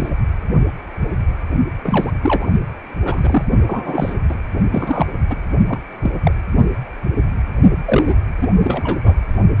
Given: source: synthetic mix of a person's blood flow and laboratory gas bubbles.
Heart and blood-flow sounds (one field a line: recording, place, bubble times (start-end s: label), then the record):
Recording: Doppler ultrasound of blood flow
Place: precordium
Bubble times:
0.00-0.10 s: bubbles
1.83-2.12 s: bubbles
2.23-2.47 s: bubbles
3.04-3.45 s: bubbles
3.66-4.15 s: bubbles
4.28-4.35 s: bubbles
4.71-5.06 s: bubbles
5.29-5.35 s: bubbles
5.68-5.78 s: bubbles
6.01-6.11 s: bubbles
6.23-6.31 s: bubbles
7.85-8.15 s: bubbles
8.42-8.48 s: bubbles
8.63-8.99 s: bubbles
9.04-9.15 s: bubbles
From the record:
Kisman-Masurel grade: 232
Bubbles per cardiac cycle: several, 3 to 8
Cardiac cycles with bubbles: 50 to 99%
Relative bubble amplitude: moderate (0.250 to 0.450)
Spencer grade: 3 (all of the cardiac periods contain showers or single bubble signals, but not dominating or overriding the cardiac motion signals)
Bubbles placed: only in the low amplitude regions of the cardiac cycle